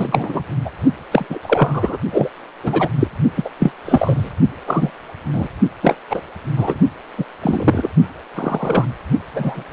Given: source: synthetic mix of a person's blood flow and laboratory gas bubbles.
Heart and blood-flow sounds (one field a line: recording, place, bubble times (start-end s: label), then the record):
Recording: Doppler ultrasound of blood flow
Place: precordium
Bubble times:
0.00-0.44 s: bubbles
0.64-0.70 s: bubbles
1.11-1.26 s: bubbles
1.29-1.38 s: bubbles
1.42-1.97 s: bubbles
2.12-2.30 s: bubbles
2.63-2.88 s: bubbles
3.00-3.08 s: bubbles
3.36-3.50 s: bubbles
3.59-3.72 s: bubbles
3.85-4.30 s: bubbles
4.67-4.91 s: bubbles
5.32-5.48 s: bubbles
5.82-5.96 s: bubbles
6.10-6.22 s: bubbles
6.57-6.79 s: bubbles
7.17-7.25 s: bubbles
7.42-7.90 s: bubbles
8.34-8.85 s: bubbles
9.32-9.64 s: bubbles
From the record:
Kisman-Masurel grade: 243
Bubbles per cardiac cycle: several, 3 to 8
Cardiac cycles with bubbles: 100%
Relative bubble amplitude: loud (0.450 to 0.775)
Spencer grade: 3 (all of the cardiac periods contain showers or single bubble signals, but not dominating or overriding the cardiac motion signals)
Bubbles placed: only in the low amplitude regions of the cardiac cycle